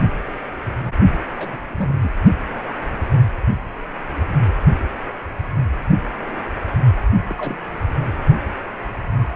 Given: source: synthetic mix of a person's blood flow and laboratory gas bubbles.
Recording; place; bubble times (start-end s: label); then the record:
Doppler ultrasound of blood flow; precordium
1.36-1.66 s: bubbles
1.70-1.99 s: bubbles
2.02-2.11 s: bubbles
7.27-7.57 s: bubbles
From the record:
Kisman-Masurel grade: 221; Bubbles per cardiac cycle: several, 3 to 8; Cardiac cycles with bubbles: 10 to 50%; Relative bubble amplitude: barely perceptible (0.100 to 0.250); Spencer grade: 2 (many but less than half of the cardiac periods contain bubble signals, singularly or in groups); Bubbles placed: anywhere in the cardiac cycle